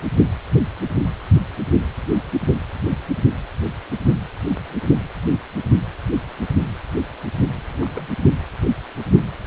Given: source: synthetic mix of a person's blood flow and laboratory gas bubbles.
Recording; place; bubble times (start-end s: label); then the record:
Doppler ultrasound of blood flow; precordium
7.54-8.13 s: bubbles
From the record:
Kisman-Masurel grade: 211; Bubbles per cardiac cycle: several, 3 to 8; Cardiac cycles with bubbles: 1 to 10%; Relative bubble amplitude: barely perceptible (0.100 to 0.250); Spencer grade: 1 (occasional bubble signal discernible with the cardiac motion signal, with majority of cardiac periods free of bubbles); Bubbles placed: only in the low amplitude regions of the cardiac cycle